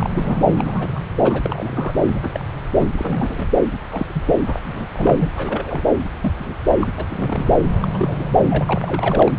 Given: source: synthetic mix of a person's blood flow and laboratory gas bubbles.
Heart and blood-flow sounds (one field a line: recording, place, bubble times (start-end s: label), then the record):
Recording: Doppler ultrasound of blood flow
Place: subclavian vein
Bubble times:
0.00-0.41 s: bubbles
0.56-0.88 s: bubbles
0.95-1.00 s: bubbles
1.24-1.94 s: bubbles
2.13-2.44 s: bubbles
2.78-2.90 s: bubbles
2.96-3.52 s: bubbles
3.92-4.24 s: bubbles
4.27-4.42 s: bubbles
4.46-4.59 s: bubbles
4.62-4.87 s: bubbles
4.92-5.30 s: bubbles
5.36-5.88 s: bubbles
6.21-6.33 s: bubbles
6.38-6.54 s: bubbles
6.70-6.74 s: bubbles
6.80-6.89 s: bubbles
6.98-7.05 s: bubbles
7.09-7.55 s: bubbles
7.81-7.88 s: bubbles
7.93-8.28 s: bubbles
8.49-8.64 s: bubbles
8.68-9.32 s: bubbles
From the record:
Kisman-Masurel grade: 242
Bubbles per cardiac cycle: several, 3 to 8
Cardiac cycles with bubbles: 100%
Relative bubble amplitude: moderate (0.250 to 0.450)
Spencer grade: 3 (all of the cardiac periods contain showers or single bubble signals, but not dominating or overriding the cardiac motion signals)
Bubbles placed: anywhere in the cardiac cycle